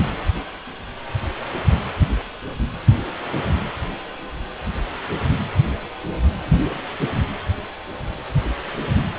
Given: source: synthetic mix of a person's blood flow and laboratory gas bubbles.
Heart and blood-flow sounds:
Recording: Doppler ultrasound of blood flow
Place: precordium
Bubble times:
no bubbles
From the record:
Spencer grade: 0 (complete lack of bubble signals)

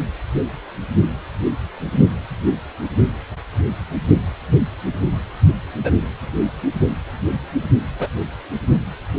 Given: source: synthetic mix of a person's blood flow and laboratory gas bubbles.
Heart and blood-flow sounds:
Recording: Doppler ultrasound of blood flow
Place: precordium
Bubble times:
5.83-5.91 s: bubbles
7.99-8.08 s: bubbles
From the record:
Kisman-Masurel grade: 113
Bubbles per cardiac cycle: 1 to 2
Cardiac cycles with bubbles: 1 to 10%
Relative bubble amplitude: loud (0.450 to 0.775)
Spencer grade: 1 (occasional bubble signal discernible with the cardiac motion signal, with majority of cardiac periods free of bubbles)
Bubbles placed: only in the low amplitude regions of the cardiac cycle

